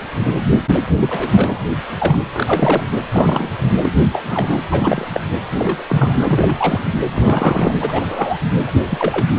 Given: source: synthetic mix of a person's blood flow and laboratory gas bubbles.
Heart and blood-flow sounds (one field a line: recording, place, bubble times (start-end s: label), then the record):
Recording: Doppler ultrasound of blood flow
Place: precordium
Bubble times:
0.18-0.40 s: bubbles
0.99-1.59 s: bubbles
1.63-1.66 s: bubbles
1.98-2.18 s: bubbles
2.33-2.83 s: bubbles
3.14-3.50 s: bubbles
3.83-4.00 s: bubbles
4.12-4.23 s: bubbles
4.29-4.62 s: bubbles
4.71-5.08 s: bubbles
5.13-5.20 s: bubbles
5.58-5.83 s: bubbles
5.88-6.83 s: bubbles
7.13-7.75 s: bubbles
7.80-8.39 s: bubbles
8.67-8.71 s: bubbles
8.89-9.27 s: bubbles
From the record:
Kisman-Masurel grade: 242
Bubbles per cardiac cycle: several, 3 to 8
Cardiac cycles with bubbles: 100%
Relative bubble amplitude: moderate (0.250 to 0.450)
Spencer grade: 3 (all of the cardiac periods contain showers or single bubble signals, but not dominating or overriding the cardiac motion signals)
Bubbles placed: anywhere in the cardiac cycle